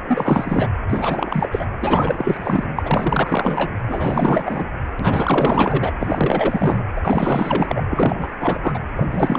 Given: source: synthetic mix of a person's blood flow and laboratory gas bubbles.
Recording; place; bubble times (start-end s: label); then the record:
Doppler ultrasound of blood flow; precordium
0.07-0.69 s: bubbles
0.88-1.67 s: bubbles
1.81-2.67 s: bubbles
2.76-3.72 s: bubbles
3.88-4.65 s: bubbles
4.99-5.92 s: bubbles
5.99-6.83 s: bubbles
6.96-7.01 s: bubbles
7.03-7.83 s: bubbles
7.89-8.26 s: bubbles
8.39-8.59 s: bubbles
8.62-8.79 s: bubbles
8.96-9.38 s: bubbles
From the record:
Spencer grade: 4 (maximum detectable bubble signal sounding continuously throughout systole and diastole of every cardiac period, and overriding the amplitude of the normal cardiac signals); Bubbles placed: anywhere in the cardiac cycle